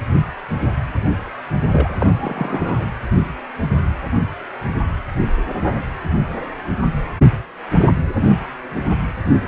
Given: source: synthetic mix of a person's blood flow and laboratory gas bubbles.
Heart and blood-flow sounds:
Doppler ultrasound of blood flow; precordium
1.70-1.97 s: bubbles
2.00-2.88 s: bubbles
From the record:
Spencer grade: 2 (many but less than half of the cardiac periods contain bubble signals, singularly or in groups); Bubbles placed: anywhere in the cardiac cycle

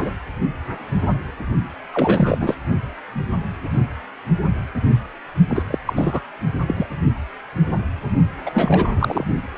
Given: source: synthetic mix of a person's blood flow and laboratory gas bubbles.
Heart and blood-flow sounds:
Doppler ultrasound of blood flow; precordium
0.00-0.11 s: bubbles
1.92-2.56 s: bubbles
5.48-5.63 s: bubbles
5.71-5.78 s: bubbles
5.86-6.21 s: bubbles
6.67-6.87 s: bubbles
8.46-8.92 s: bubbles
8.97-9.24 s: bubbles
From the record:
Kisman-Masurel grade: 333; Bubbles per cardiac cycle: rolling drumbeat, 9 or more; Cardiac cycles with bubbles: 50 to 99%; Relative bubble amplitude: loud (0.450 to 0.775); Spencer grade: 3 (all of the cardiac periods contain showers or single bubble signals, but not dominating or overriding the cardiac motion signals); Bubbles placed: only in the low amplitude regions of the cardiac cycle

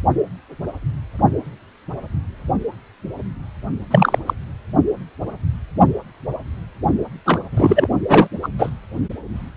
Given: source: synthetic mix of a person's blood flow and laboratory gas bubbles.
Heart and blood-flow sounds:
Doppler ultrasound of blood flow; precordium
3.91-4.18 s: bubbles
4.26-4.33 s: bubbles
7.25-7.40 s: bubbles
7.51-7.88 s: bubbles
8.08-8.28 s: bubbles
8.42-8.48 s: bubbles
8.58-8.70 s: bubbles
From the record:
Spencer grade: 2 (many but less than half of the cardiac periods contain bubble signals, singularly or in groups); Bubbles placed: only in the low amplitude regions of the cardiac cycle

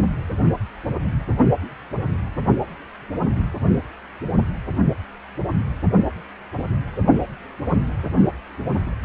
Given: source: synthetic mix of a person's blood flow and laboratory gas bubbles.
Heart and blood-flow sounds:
Doppler ultrasound of blood flow; precordium
no bubbles
From the record:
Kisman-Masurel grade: 000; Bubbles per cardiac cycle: 0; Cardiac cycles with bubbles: 0%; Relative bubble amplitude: no bubbles discernible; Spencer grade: 0 (complete lack of bubble signals)

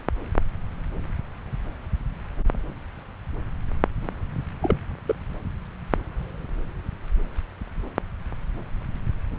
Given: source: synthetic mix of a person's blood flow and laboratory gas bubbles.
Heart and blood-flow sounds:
Doppler ultrasound of blood flow; subclavian vein
4.62-4.75 s: bubbles
5.08-5.14 s: bubbles
From the record:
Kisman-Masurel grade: 111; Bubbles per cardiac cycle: 1 to 2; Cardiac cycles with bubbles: 1 to 10%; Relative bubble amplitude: barely perceptible (0.100 to 0.250); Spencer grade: 1 (occasional bubble signal discernible with the cardiac motion signal, with majority of cardiac periods free of bubbles); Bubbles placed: anywhere in the cardiac cycle

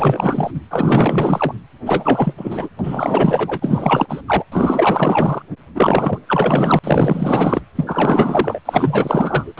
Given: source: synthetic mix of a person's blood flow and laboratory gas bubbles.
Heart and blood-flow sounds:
Doppler ultrasound of blood flow; precordium
0.00-0.51 s: bubbles
0.54-0.60 s: bubbles
0.70-1.53 s: bubbles
1.85-2.33 s: bubbles
2.37-2.69 s: bubbles
2.79-4.21 s: bubbles
4.28-4.45 s: bubbles
4.51-5.42 s: bubbles
5.75-6.18 s: bubbles
6.28-6.79 s: bubbles
6.83-7.61 s: bubbles
7.75-8.59 s: bubbles
8.65-9.53 s: bubbles
9.57-9.60 s: bubbles
From the record:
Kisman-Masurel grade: 444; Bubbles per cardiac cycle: continuous sound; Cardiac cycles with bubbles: 100%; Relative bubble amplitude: maximal (0.775 to 0.999); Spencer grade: 4 (maximum detectable bubble signal sounding continuously throughout systole and diastole of every cardiac period, and overriding the amplitude of the normal cardiac signals); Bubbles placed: anywhere in the cardiac cycle

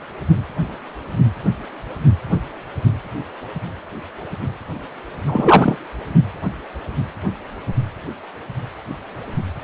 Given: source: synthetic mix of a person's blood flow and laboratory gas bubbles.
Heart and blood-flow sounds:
Doppler ultrasound of blood flow; precordium
5.27-5.78 s: bubbles
From the record:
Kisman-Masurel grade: 223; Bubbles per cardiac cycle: several, 3 to 8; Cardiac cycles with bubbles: 10 to 50%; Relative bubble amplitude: loud (0.450 to 0.775); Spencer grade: 2 (many but less than half of the cardiac periods contain bubble signals, singularly or in groups); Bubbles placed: anywhere in the cardiac cycle

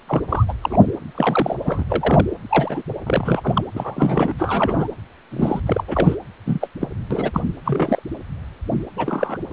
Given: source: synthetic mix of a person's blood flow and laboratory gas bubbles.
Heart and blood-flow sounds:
Doppler ultrasound of blood flow; precordium
0.07-0.22 s: bubbles
0.28-0.45 s: bubbles
0.48-0.53 s: bubbles
0.61-0.86 s: bubbles
1.15-1.57 s: bubbles
1.64-1.84 s: bubbles
1.89-2.27 s: bubbles
2.49-2.82 s: bubbles
3.06-3.64 s: bubbles
3.74-4.33 s: bubbles
4.38-4.87 s: bubbles
5.31-5.60 s: bubbles
5.66-5.84 s: bubbles
5.88-6.16 s: bubbles
6.46-6.67 s: bubbles
6.80-6.88 s: bubbles
7.11-7.30 s: bubbles
7.33-7.42 s: bubbles
7.65-8.03 s: bubbles
8.96-9.38 s: bubbles
From the record:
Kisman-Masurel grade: 232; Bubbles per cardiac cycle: several, 3 to 8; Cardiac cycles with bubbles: 50 to 99%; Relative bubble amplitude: moderate (0.250 to 0.450); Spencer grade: 3 (all of the cardiac periods contain showers or single bubble signals, but not dominating or overriding the cardiac motion signals); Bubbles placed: anywhere in the cardiac cycle

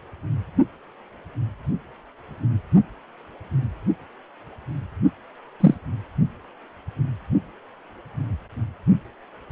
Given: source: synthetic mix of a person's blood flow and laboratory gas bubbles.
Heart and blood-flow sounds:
Doppler ultrasound of blood flow; precordium
5.60-5.75 s: bubbles
From the record:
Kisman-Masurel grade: 113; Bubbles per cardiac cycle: 1 to 2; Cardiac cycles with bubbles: 1 to 10%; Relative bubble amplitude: loud (0.450 to 0.775); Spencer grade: 1 (occasional bubble signal discernible with the cardiac motion signal, with majority of cardiac periods free of bubbles); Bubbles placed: only in the low amplitude regions of the cardiac cycle

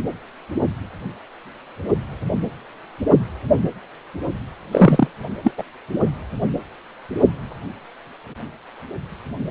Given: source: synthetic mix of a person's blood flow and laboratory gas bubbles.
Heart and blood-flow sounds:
Doppler ultrasound of blood flow; precordium
4.71-5.07 s: bubbles
5.43-5.51 s: bubbles
5.58-5.63 s: bubbles
From the record:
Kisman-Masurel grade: 213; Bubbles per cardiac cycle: several, 3 to 8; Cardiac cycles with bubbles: 1 to 10%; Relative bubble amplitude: loud (0.450 to 0.775); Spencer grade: 1 (occasional bubble signal discernible with the cardiac motion signal, with majority of cardiac periods free of bubbles); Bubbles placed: only in the low amplitude regions of the cardiac cycle

